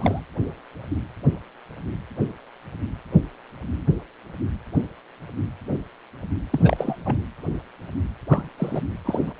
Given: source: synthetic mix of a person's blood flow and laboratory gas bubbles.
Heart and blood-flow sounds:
Doppler ultrasound of blood flow; precordium
0.00-0.20 s: bubbles
6.51-6.96 s: bubbles
7.05-7.17 s: bubbles
8.29-8.49 s: bubbles
8.57-8.81 s: bubbles
9.05-9.33 s: bubbles
From the record:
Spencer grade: 2 (many but less than half of the cardiac periods contain bubble signals, singularly or in groups); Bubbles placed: anywhere in the cardiac cycle

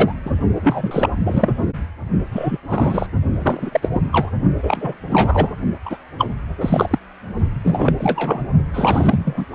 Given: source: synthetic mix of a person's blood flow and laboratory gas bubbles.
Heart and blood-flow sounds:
Doppler ultrasound of blood flow; precordium
0.00-0.13 s: bubbles
0.25-0.33 s: bubbles
0.55-1.10 s: bubbles
1.23-1.54 s: bubbles
2.31-2.58 s: bubbles
2.67-3.06 s: bubbles
3.42-4.01 s: bubbles
4.12-4.31 s: bubbles
4.62-4.97 s: bubbles
5.10-5.56 s: bubbles
5.85-5.97 s: bubbles
6.18-6.28 s: bubbles
6.60-6.98 s: bubbles
7.63-7.94 s: bubbles
7.99-8.44 s: bubbles
8.73-9.46 s: bubbles
From the record:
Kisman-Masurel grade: 343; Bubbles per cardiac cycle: rolling drumbeat, 9 or more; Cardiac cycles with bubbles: 100%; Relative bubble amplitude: loud (0.450 to 0.775); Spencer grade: 3 (all of the cardiac periods contain showers or single bubble signals, but not dominating or overriding the cardiac motion signals); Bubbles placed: only in the low amplitude regions of the cardiac cycle

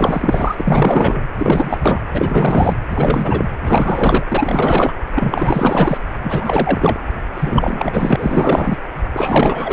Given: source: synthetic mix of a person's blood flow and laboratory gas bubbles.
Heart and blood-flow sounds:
Doppler ultrasound of blood flow; precordium
0.00-1.20 s: bubbles
1.35-1.78 s: bubbles
1.80-2.01 s: bubbles
2.13-2.74 s: bubbles
2.89-3.45 s: bubbles
3.65-4.23 s: bubbles
4.28-4.93 s: bubbles
5.14-5.98 s: bubbles
6.22-7.00 s: bubbles
7.34-8.77 s: bubbles
9.12-9.73 s: bubbles
From the record:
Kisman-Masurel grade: 444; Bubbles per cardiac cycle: continuous sound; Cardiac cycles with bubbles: 100%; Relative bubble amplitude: maximal (0.775 to 0.999); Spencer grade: 4 (maximum detectable bubble signal sounding continuously throughout systole and diastole of every cardiac period, and overriding the amplitude of the normal cardiac signals); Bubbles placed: anywhere in the cardiac cycle

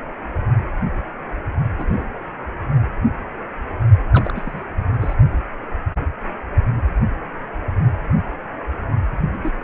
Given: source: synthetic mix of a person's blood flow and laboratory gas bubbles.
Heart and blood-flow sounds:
Doppler ultrasound of blood flow; precordium
1.78-2.07 s: bubbles
2.11-2.19 s: bubbles
4.11-4.33 s: bubbles
4.35-4.66 s: bubbles
4.92-4.96 s: bubbles
5.00-5.15 s: bubbles
9.34-9.38 s: bubbles
9.43-9.53 s: bubbles
From the record:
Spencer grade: 2 (many but less than half of the cardiac periods contain bubble signals, singularly or in groups); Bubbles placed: only in the low amplitude regions of the cardiac cycle

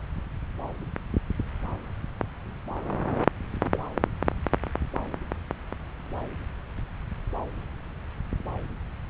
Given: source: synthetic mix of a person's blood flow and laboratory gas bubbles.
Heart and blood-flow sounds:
Doppler ultrasound of blood flow; subclavian vein
3.73-3.77 s: bubbles
From the record:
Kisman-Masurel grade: 112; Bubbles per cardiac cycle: 1 to 2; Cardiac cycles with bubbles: 1 to 10%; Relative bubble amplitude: moderate (0.250 to 0.450); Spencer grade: 1 (occasional bubble signal discernible with the cardiac motion signal, with majority of cardiac periods free of bubbles); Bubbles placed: anywhere in the cardiac cycle

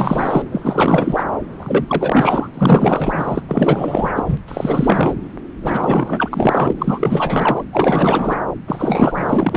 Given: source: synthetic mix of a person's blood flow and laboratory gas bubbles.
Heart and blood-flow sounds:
Doppler ultrasound of blood flow; subclavian vein
0.00-0.45 s: bubbles
0.51-1.25 s: bubbles
1.59-2.48 s: bubbles
2.54-3.42 s: bubbles
3.48-4.11 s: bubbles
4.15-4.24 s: bubbles
4.28-4.38 s: bubbles
4.48-5.14 s: bubbles
5.62-6.72 s: bubbles
6.78-7.63 s: bubbles
7.72-8.38 s: bubbles
8.67-9.57 s: bubbles
From the record:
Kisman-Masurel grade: 444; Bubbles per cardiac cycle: continuous sound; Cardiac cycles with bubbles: 100%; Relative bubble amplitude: maximal (0.775 to 0.999); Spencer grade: 4 (maximum detectable bubble signal sounding continuously throughout systole and diastole of every cardiac period, and overriding the amplitude of the normal cardiac signals); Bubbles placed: anywhere in the cardiac cycle

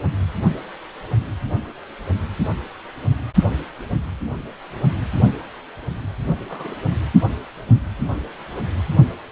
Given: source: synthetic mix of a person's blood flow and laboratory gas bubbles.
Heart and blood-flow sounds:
Doppler ultrasound of blood flow; precordium
6.49-6.75 s: bubbles
From the record:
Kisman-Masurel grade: 111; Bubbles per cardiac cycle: 1 to 2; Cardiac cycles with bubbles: 1 to 10%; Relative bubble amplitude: barely perceptible (0.100 to 0.250); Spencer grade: 1 (occasional bubble signal discernible with the cardiac motion signal, with majority of cardiac periods free of bubbles); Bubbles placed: only in the low amplitude regions of the cardiac cycle

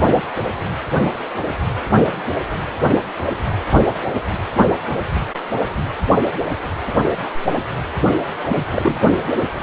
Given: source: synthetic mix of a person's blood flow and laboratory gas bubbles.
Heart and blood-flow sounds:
Doppler ultrasound of blood flow; precordium
8.43-8.62 s: bubbles
8.71-9.12 s: bubbles
From the record:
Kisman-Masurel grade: 212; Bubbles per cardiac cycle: several, 3 to 8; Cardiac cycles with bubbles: 1 to 10%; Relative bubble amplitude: moderate (0.250 to 0.450); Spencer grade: 1 (occasional bubble signal discernible with the cardiac motion signal, with majority of cardiac periods free of bubbles); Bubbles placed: anywhere in the cardiac cycle

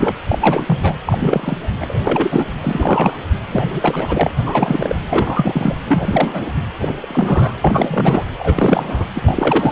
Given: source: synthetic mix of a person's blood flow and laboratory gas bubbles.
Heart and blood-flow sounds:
Doppler ultrasound of blood flow; precordium
0.00-0.15 s: bubbles
0.28-0.96 s: bubbles
1.06-1.57 s: bubbles
1.80-2.00 s: bubbles
2.03-2.45 s: bubbles
2.61-3.19 s: bubbles
3.48-4.31 s: bubbles
4.46-4.97 s: bubbles
5.10-5.75 s: bubbles
5.86-6.51 s: bubbles
6.82-6.94 s: bubbles
6.99-7.57 s: bubbles
7.62-8.24 s: bubbles
8.38-9.06 s: bubbles
9.14-9.72 s: bubbles
From the record:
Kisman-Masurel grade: 343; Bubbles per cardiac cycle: rolling drumbeat, 9 or more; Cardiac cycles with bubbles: 100%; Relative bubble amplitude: loud (0.450 to 0.775); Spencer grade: 3 (all of the cardiac periods contain showers or single bubble signals, but not dominating or overriding the cardiac motion signals); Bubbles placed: anywhere in the cardiac cycle

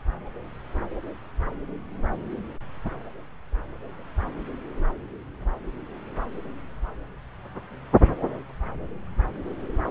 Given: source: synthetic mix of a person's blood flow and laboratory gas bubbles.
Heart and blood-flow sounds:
Doppler ultrasound of blood flow; subclavian vein
no bubbles
From the record:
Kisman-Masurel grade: 000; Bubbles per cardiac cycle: 0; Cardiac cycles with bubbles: 0%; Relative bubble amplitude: no bubbles discernible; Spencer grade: 0 (complete lack of bubble signals)

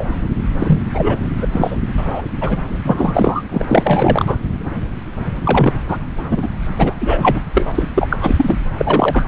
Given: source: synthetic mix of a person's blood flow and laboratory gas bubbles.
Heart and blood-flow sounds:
Doppler ultrasound of blood flow; subclavian vein
0.00-0.05 s: bubbles
0.58-0.79 s: bubbles
0.93-1.19 s: bubbles
1.42-1.47 s: bubbles
1.52-1.77 s: bubbles
1.98-2.23 s: bubbles
2.40-2.58 s: bubbles
2.84-3.42 s: bubbles
3.51-4.36 s: bubbles
5.43-5.73 s: bubbles
5.88-5.97 s: bubbles
6.30-6.48 s: bubbles
6.79-6.94 s: bubbles
7.00-7.41 s: bubbles
7.54-7.72 s: bubbles
7.74-7.87 s: bubbles
7.95-8.17 s: bubbles
8.21-8.56 s: bubbles
8.77-9.28 s: bubbles
From the record:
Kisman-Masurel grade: 333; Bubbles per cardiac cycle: rolling drumbeat, 9 or more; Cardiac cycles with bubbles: 50 to 99%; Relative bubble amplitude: loud (0.450 to 0.775); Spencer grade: 3 (all of the cardiac periods contain showers or single bubble signals, but not dominating or overriding the cardiac motion signals); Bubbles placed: anywhere in the cardiac cycle

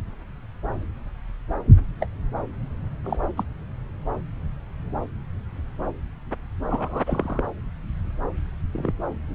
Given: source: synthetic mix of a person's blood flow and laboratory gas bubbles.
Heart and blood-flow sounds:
Doppler ultrasound of blood flow; subclavian vein
2.00-2.06 s: bubbles
3.04-3.29 s: bubbles
3.37-3.44 s: bubbles
6.70-7.42 s: bubbles
8.73-8.92 s: bubbles
From the record:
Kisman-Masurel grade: 122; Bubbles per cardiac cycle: 1 to 2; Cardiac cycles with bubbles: 10 to 50%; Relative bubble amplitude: moderate (0.250 to 0.450); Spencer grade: 2 (many but less than half of the cardiac periods contain bubble signals, singularly or in groups); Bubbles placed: anywhere in the cardiac cycle

